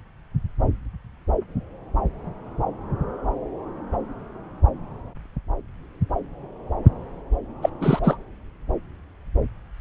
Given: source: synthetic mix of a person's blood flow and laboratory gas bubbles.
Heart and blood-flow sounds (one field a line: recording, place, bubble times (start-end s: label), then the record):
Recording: Doppler ultrasound of blood flow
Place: subclavian vein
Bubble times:
7.62-7.69 s: bubbles
7.80-7.99 s: bubbles
8.04-8.17 s: bubbles
From the record:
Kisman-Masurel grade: 213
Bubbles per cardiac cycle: several, 3 to 8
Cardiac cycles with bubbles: 1 to 10%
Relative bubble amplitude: loud (0.450 to 0.775)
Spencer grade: 1 (occasional bubble signal discernible with the cardiac motion signal, with majority of cardiac periods free of bubbles)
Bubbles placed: anywhere in the cardiac cycle